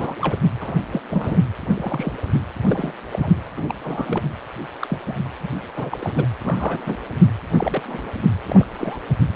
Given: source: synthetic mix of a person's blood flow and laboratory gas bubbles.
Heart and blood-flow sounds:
Doppler ultrasound of blood flow; precordium
0.00-0.15 s: bubbles
0.21-0.38 s: bubbles
0.60-0.74 s: bubbles
0.92-1.01 s: bubbles
1.10-1.43 s: bubbles
1.61-2.18 s: bubbles
2.67-2.92 s: bubbles
3.12-3.32 s: bubbles
3.56-3.77 s: bubbles
3.84-4.23 s: bubbles
4.81-4.99 s: bubbles
5.06-5.17 s: bubbles
5.43-5.48 s: bubbles
5.75-5.98 s: bubbles
6.00-6.27 s: bubbles
6.40-6.96 s: bubbles
7.52-7.83 s: bubbles
7.87-8.10 s: bubbles
8.46-8.67 s: bubbles
8.78-8.98 s: bubbles
From the record:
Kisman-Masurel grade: 242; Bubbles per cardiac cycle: several, 3 to 8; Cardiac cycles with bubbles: 100%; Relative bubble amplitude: moderate (0.250 to 0.450); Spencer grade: 3 (all of the cardiac periods contain showers or single bubble signals, but not dominating or overriding the cardiac motion signals); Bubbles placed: anywhere in the cardiac cycle

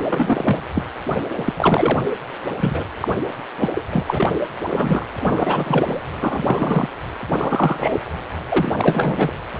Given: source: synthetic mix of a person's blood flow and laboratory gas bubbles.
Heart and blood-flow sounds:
Doppler ultrasound of blood flow; precordium
0.00-0.04 s: bubbles
0.09-0.60 s: bubbles
0.74-0.84 s: bubbles
1.37-1.53 s: bubbles
1.56-2.00 s: bubbles
2.60-2.83 s: bubbles
3.00-3.15 s: bubbles
3.59-3.69 s: bubbles
3.71-3.84 s: bubbles
3.89-4.04 s: bubbles
4.08-4.33 s: bubbles
4.66-5.05 s: bubbles
5.23-6.02 s: bubbles
6.21-6.88 s: bubbles
7.32-8.01 s: bubbles
8.49-8.71 s: bubbles
8.78-9.32 s: bubbles
From the record:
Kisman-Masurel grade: 243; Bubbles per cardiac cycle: several, 3 to 8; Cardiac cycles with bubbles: 100%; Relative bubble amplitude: loud (0.450 to 0.775); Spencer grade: 3 (all of the cardiac periods contain showers or single bubble signals, but not dominating or overriding the cardiac motion signals); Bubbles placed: anywhere in the cardiac cycle

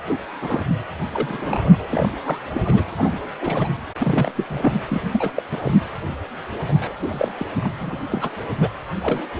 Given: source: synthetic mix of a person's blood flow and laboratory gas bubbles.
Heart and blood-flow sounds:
Doppler ultrasound of blood flow; precordium
0.08-0.17 s: bubbles
0.42-0.65 s: bubbles
1.12-1.88 s: bubbles
1.90-2.13 s: bubbles
2.25-2.84 s: bubbles
2.97-3.19 s: bubbles
3.40-3.68 s: bubbles
3.98-4.75 s: bubbles
4.90-5.01 s: bubbles
5.12-5.32 s: bubbles
5.36-5.44 s: bubbles
5.51-5.60 s: bubbles
5.64-5.72 s: bubbles
6.68-6.92 s: bubbles
6.99-7.32 s: bubbles
7.38-7.43 s: bubbles
7.61-7.71 s: bubbles
7.80-7.97 s: bubbles
8.10-8.30 s: bubbles
8.61-8.69 s: bubbles
9.02-9.26 s: bubbles
From the record:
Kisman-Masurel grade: 242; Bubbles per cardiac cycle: several, 3 to 8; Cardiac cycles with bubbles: 100%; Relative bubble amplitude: moderate (0.250 to 0.450); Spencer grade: 3 (all of the cardiac periods contain showers or single bubble signals, but not dominating or overriding the cardiac motion signals); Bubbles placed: anywhere in the cardiac cycle

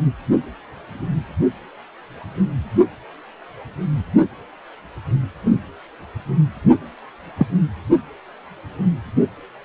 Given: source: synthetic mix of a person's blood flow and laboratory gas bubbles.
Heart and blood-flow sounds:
Doppler ultrasound of blood flow; precordium
7.38-7.46 s: bubbles
From the record:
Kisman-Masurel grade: 113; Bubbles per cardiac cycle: 1 to 2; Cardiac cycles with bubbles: 1 to 10%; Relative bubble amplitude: loud (0.450 to 0.775); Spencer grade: 1 (occasional bubble signal discernible with the cardiac motion signal, with majority of cardiac periods free of bubbles); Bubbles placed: only in the low amplitude regions of the cardiac cycle

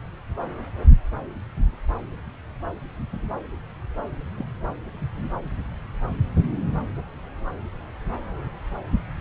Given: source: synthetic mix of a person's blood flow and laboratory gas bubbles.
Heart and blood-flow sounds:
Doppler ultrasound of blood flow; subclavian vein
4.38-4.45 s: bubbles
From the record:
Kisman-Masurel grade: 111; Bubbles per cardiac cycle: 1 to 2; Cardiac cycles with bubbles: 1 to 10%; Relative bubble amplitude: barely perceptible (0.100 to 0.250); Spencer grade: 1 (occasional bubble signal discernible with the cardiac motion signal, with majority of cardiac periods free of bubbles); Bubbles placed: anywhere in the cardiac cycle

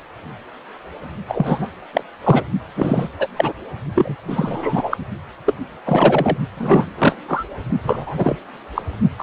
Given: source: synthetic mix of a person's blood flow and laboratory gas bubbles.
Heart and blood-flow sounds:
Doppler ultrasound of blood flow; precordium
1.29-1.68 s: bubbles
1.93-2.03 s: bubbles
2.23-2.44 s: bubbles
2.75-3.08 s: bubbles
3.19-3.28 s: bubbles
3.36-3.52 s: bubbles
3.94-4.16 s: bubbles
4.28-4.98 s: bubbles
5.46-5.54 s: bubbles
5.85-6.38 s: bubbles
6.57-6.85 s: bubbles
6.98-7.16 s: bubbles
7.28-7.44 s: bubbles
7.83-8.37 s: bubbles
8.74-8.82 s: bubbles
9.19-9.23 s: bubbles
From the record:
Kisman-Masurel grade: 233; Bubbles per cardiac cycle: several, 3 to 8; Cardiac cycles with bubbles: 50 to 99%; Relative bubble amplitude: loud (0.450 to 0.775); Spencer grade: 3 (all of the cardiac periods contain showers or single bubble signals, but not dominating or overriding the cardiac motion signals); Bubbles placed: only in the low amplitude regions of the cardiac cycle

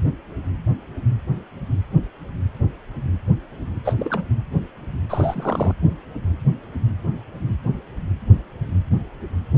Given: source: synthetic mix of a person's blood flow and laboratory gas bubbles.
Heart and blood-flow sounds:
Doppler ultrasound of blood flow; precordium
3.84-3.93 s: bubbles
3.99-4.25 s: bubbles
5.08-5.74 s: bubbles
From the record:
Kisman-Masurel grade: 222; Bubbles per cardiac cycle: several, 3 to 8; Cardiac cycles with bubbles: 10 to 50%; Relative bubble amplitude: moderate (0.250 to 0.450); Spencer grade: 2 (many but less than half of the cardiac periods contain bubble signals, singularly or in groups); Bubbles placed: anywhere in the cardiac cycle

